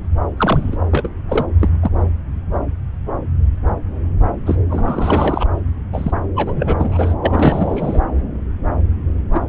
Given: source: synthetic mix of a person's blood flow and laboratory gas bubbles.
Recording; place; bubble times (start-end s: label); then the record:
Doppler ultrasound of blood flow; subclavian vein
0.37-0.77 s: bubbles
0.91-1.09 s: bubbles
1.29-1.46 s: bubbles
1.60-1.69 s: bubbles
1.81-1.91 s: bubbles
4.46-4.55 s: bubbles
4.70-5.46 s: bubbles
5.92-6.12 s: bubbles
6.36-7.14 s: bubbles
7.21-8.00 s: bubbles
9.31-9.40 s: bubbles
From the record:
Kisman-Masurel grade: 332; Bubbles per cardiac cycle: rolling drumbeat, 9 or more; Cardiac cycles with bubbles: 50 to 99%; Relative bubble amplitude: moderate (0.250 to 0.450); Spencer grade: 3 (all of the cardiac periods contain showers or single bubble signals, but not dominating or overriding the cardiac motion signals); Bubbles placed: anywhere in the cardiac cycle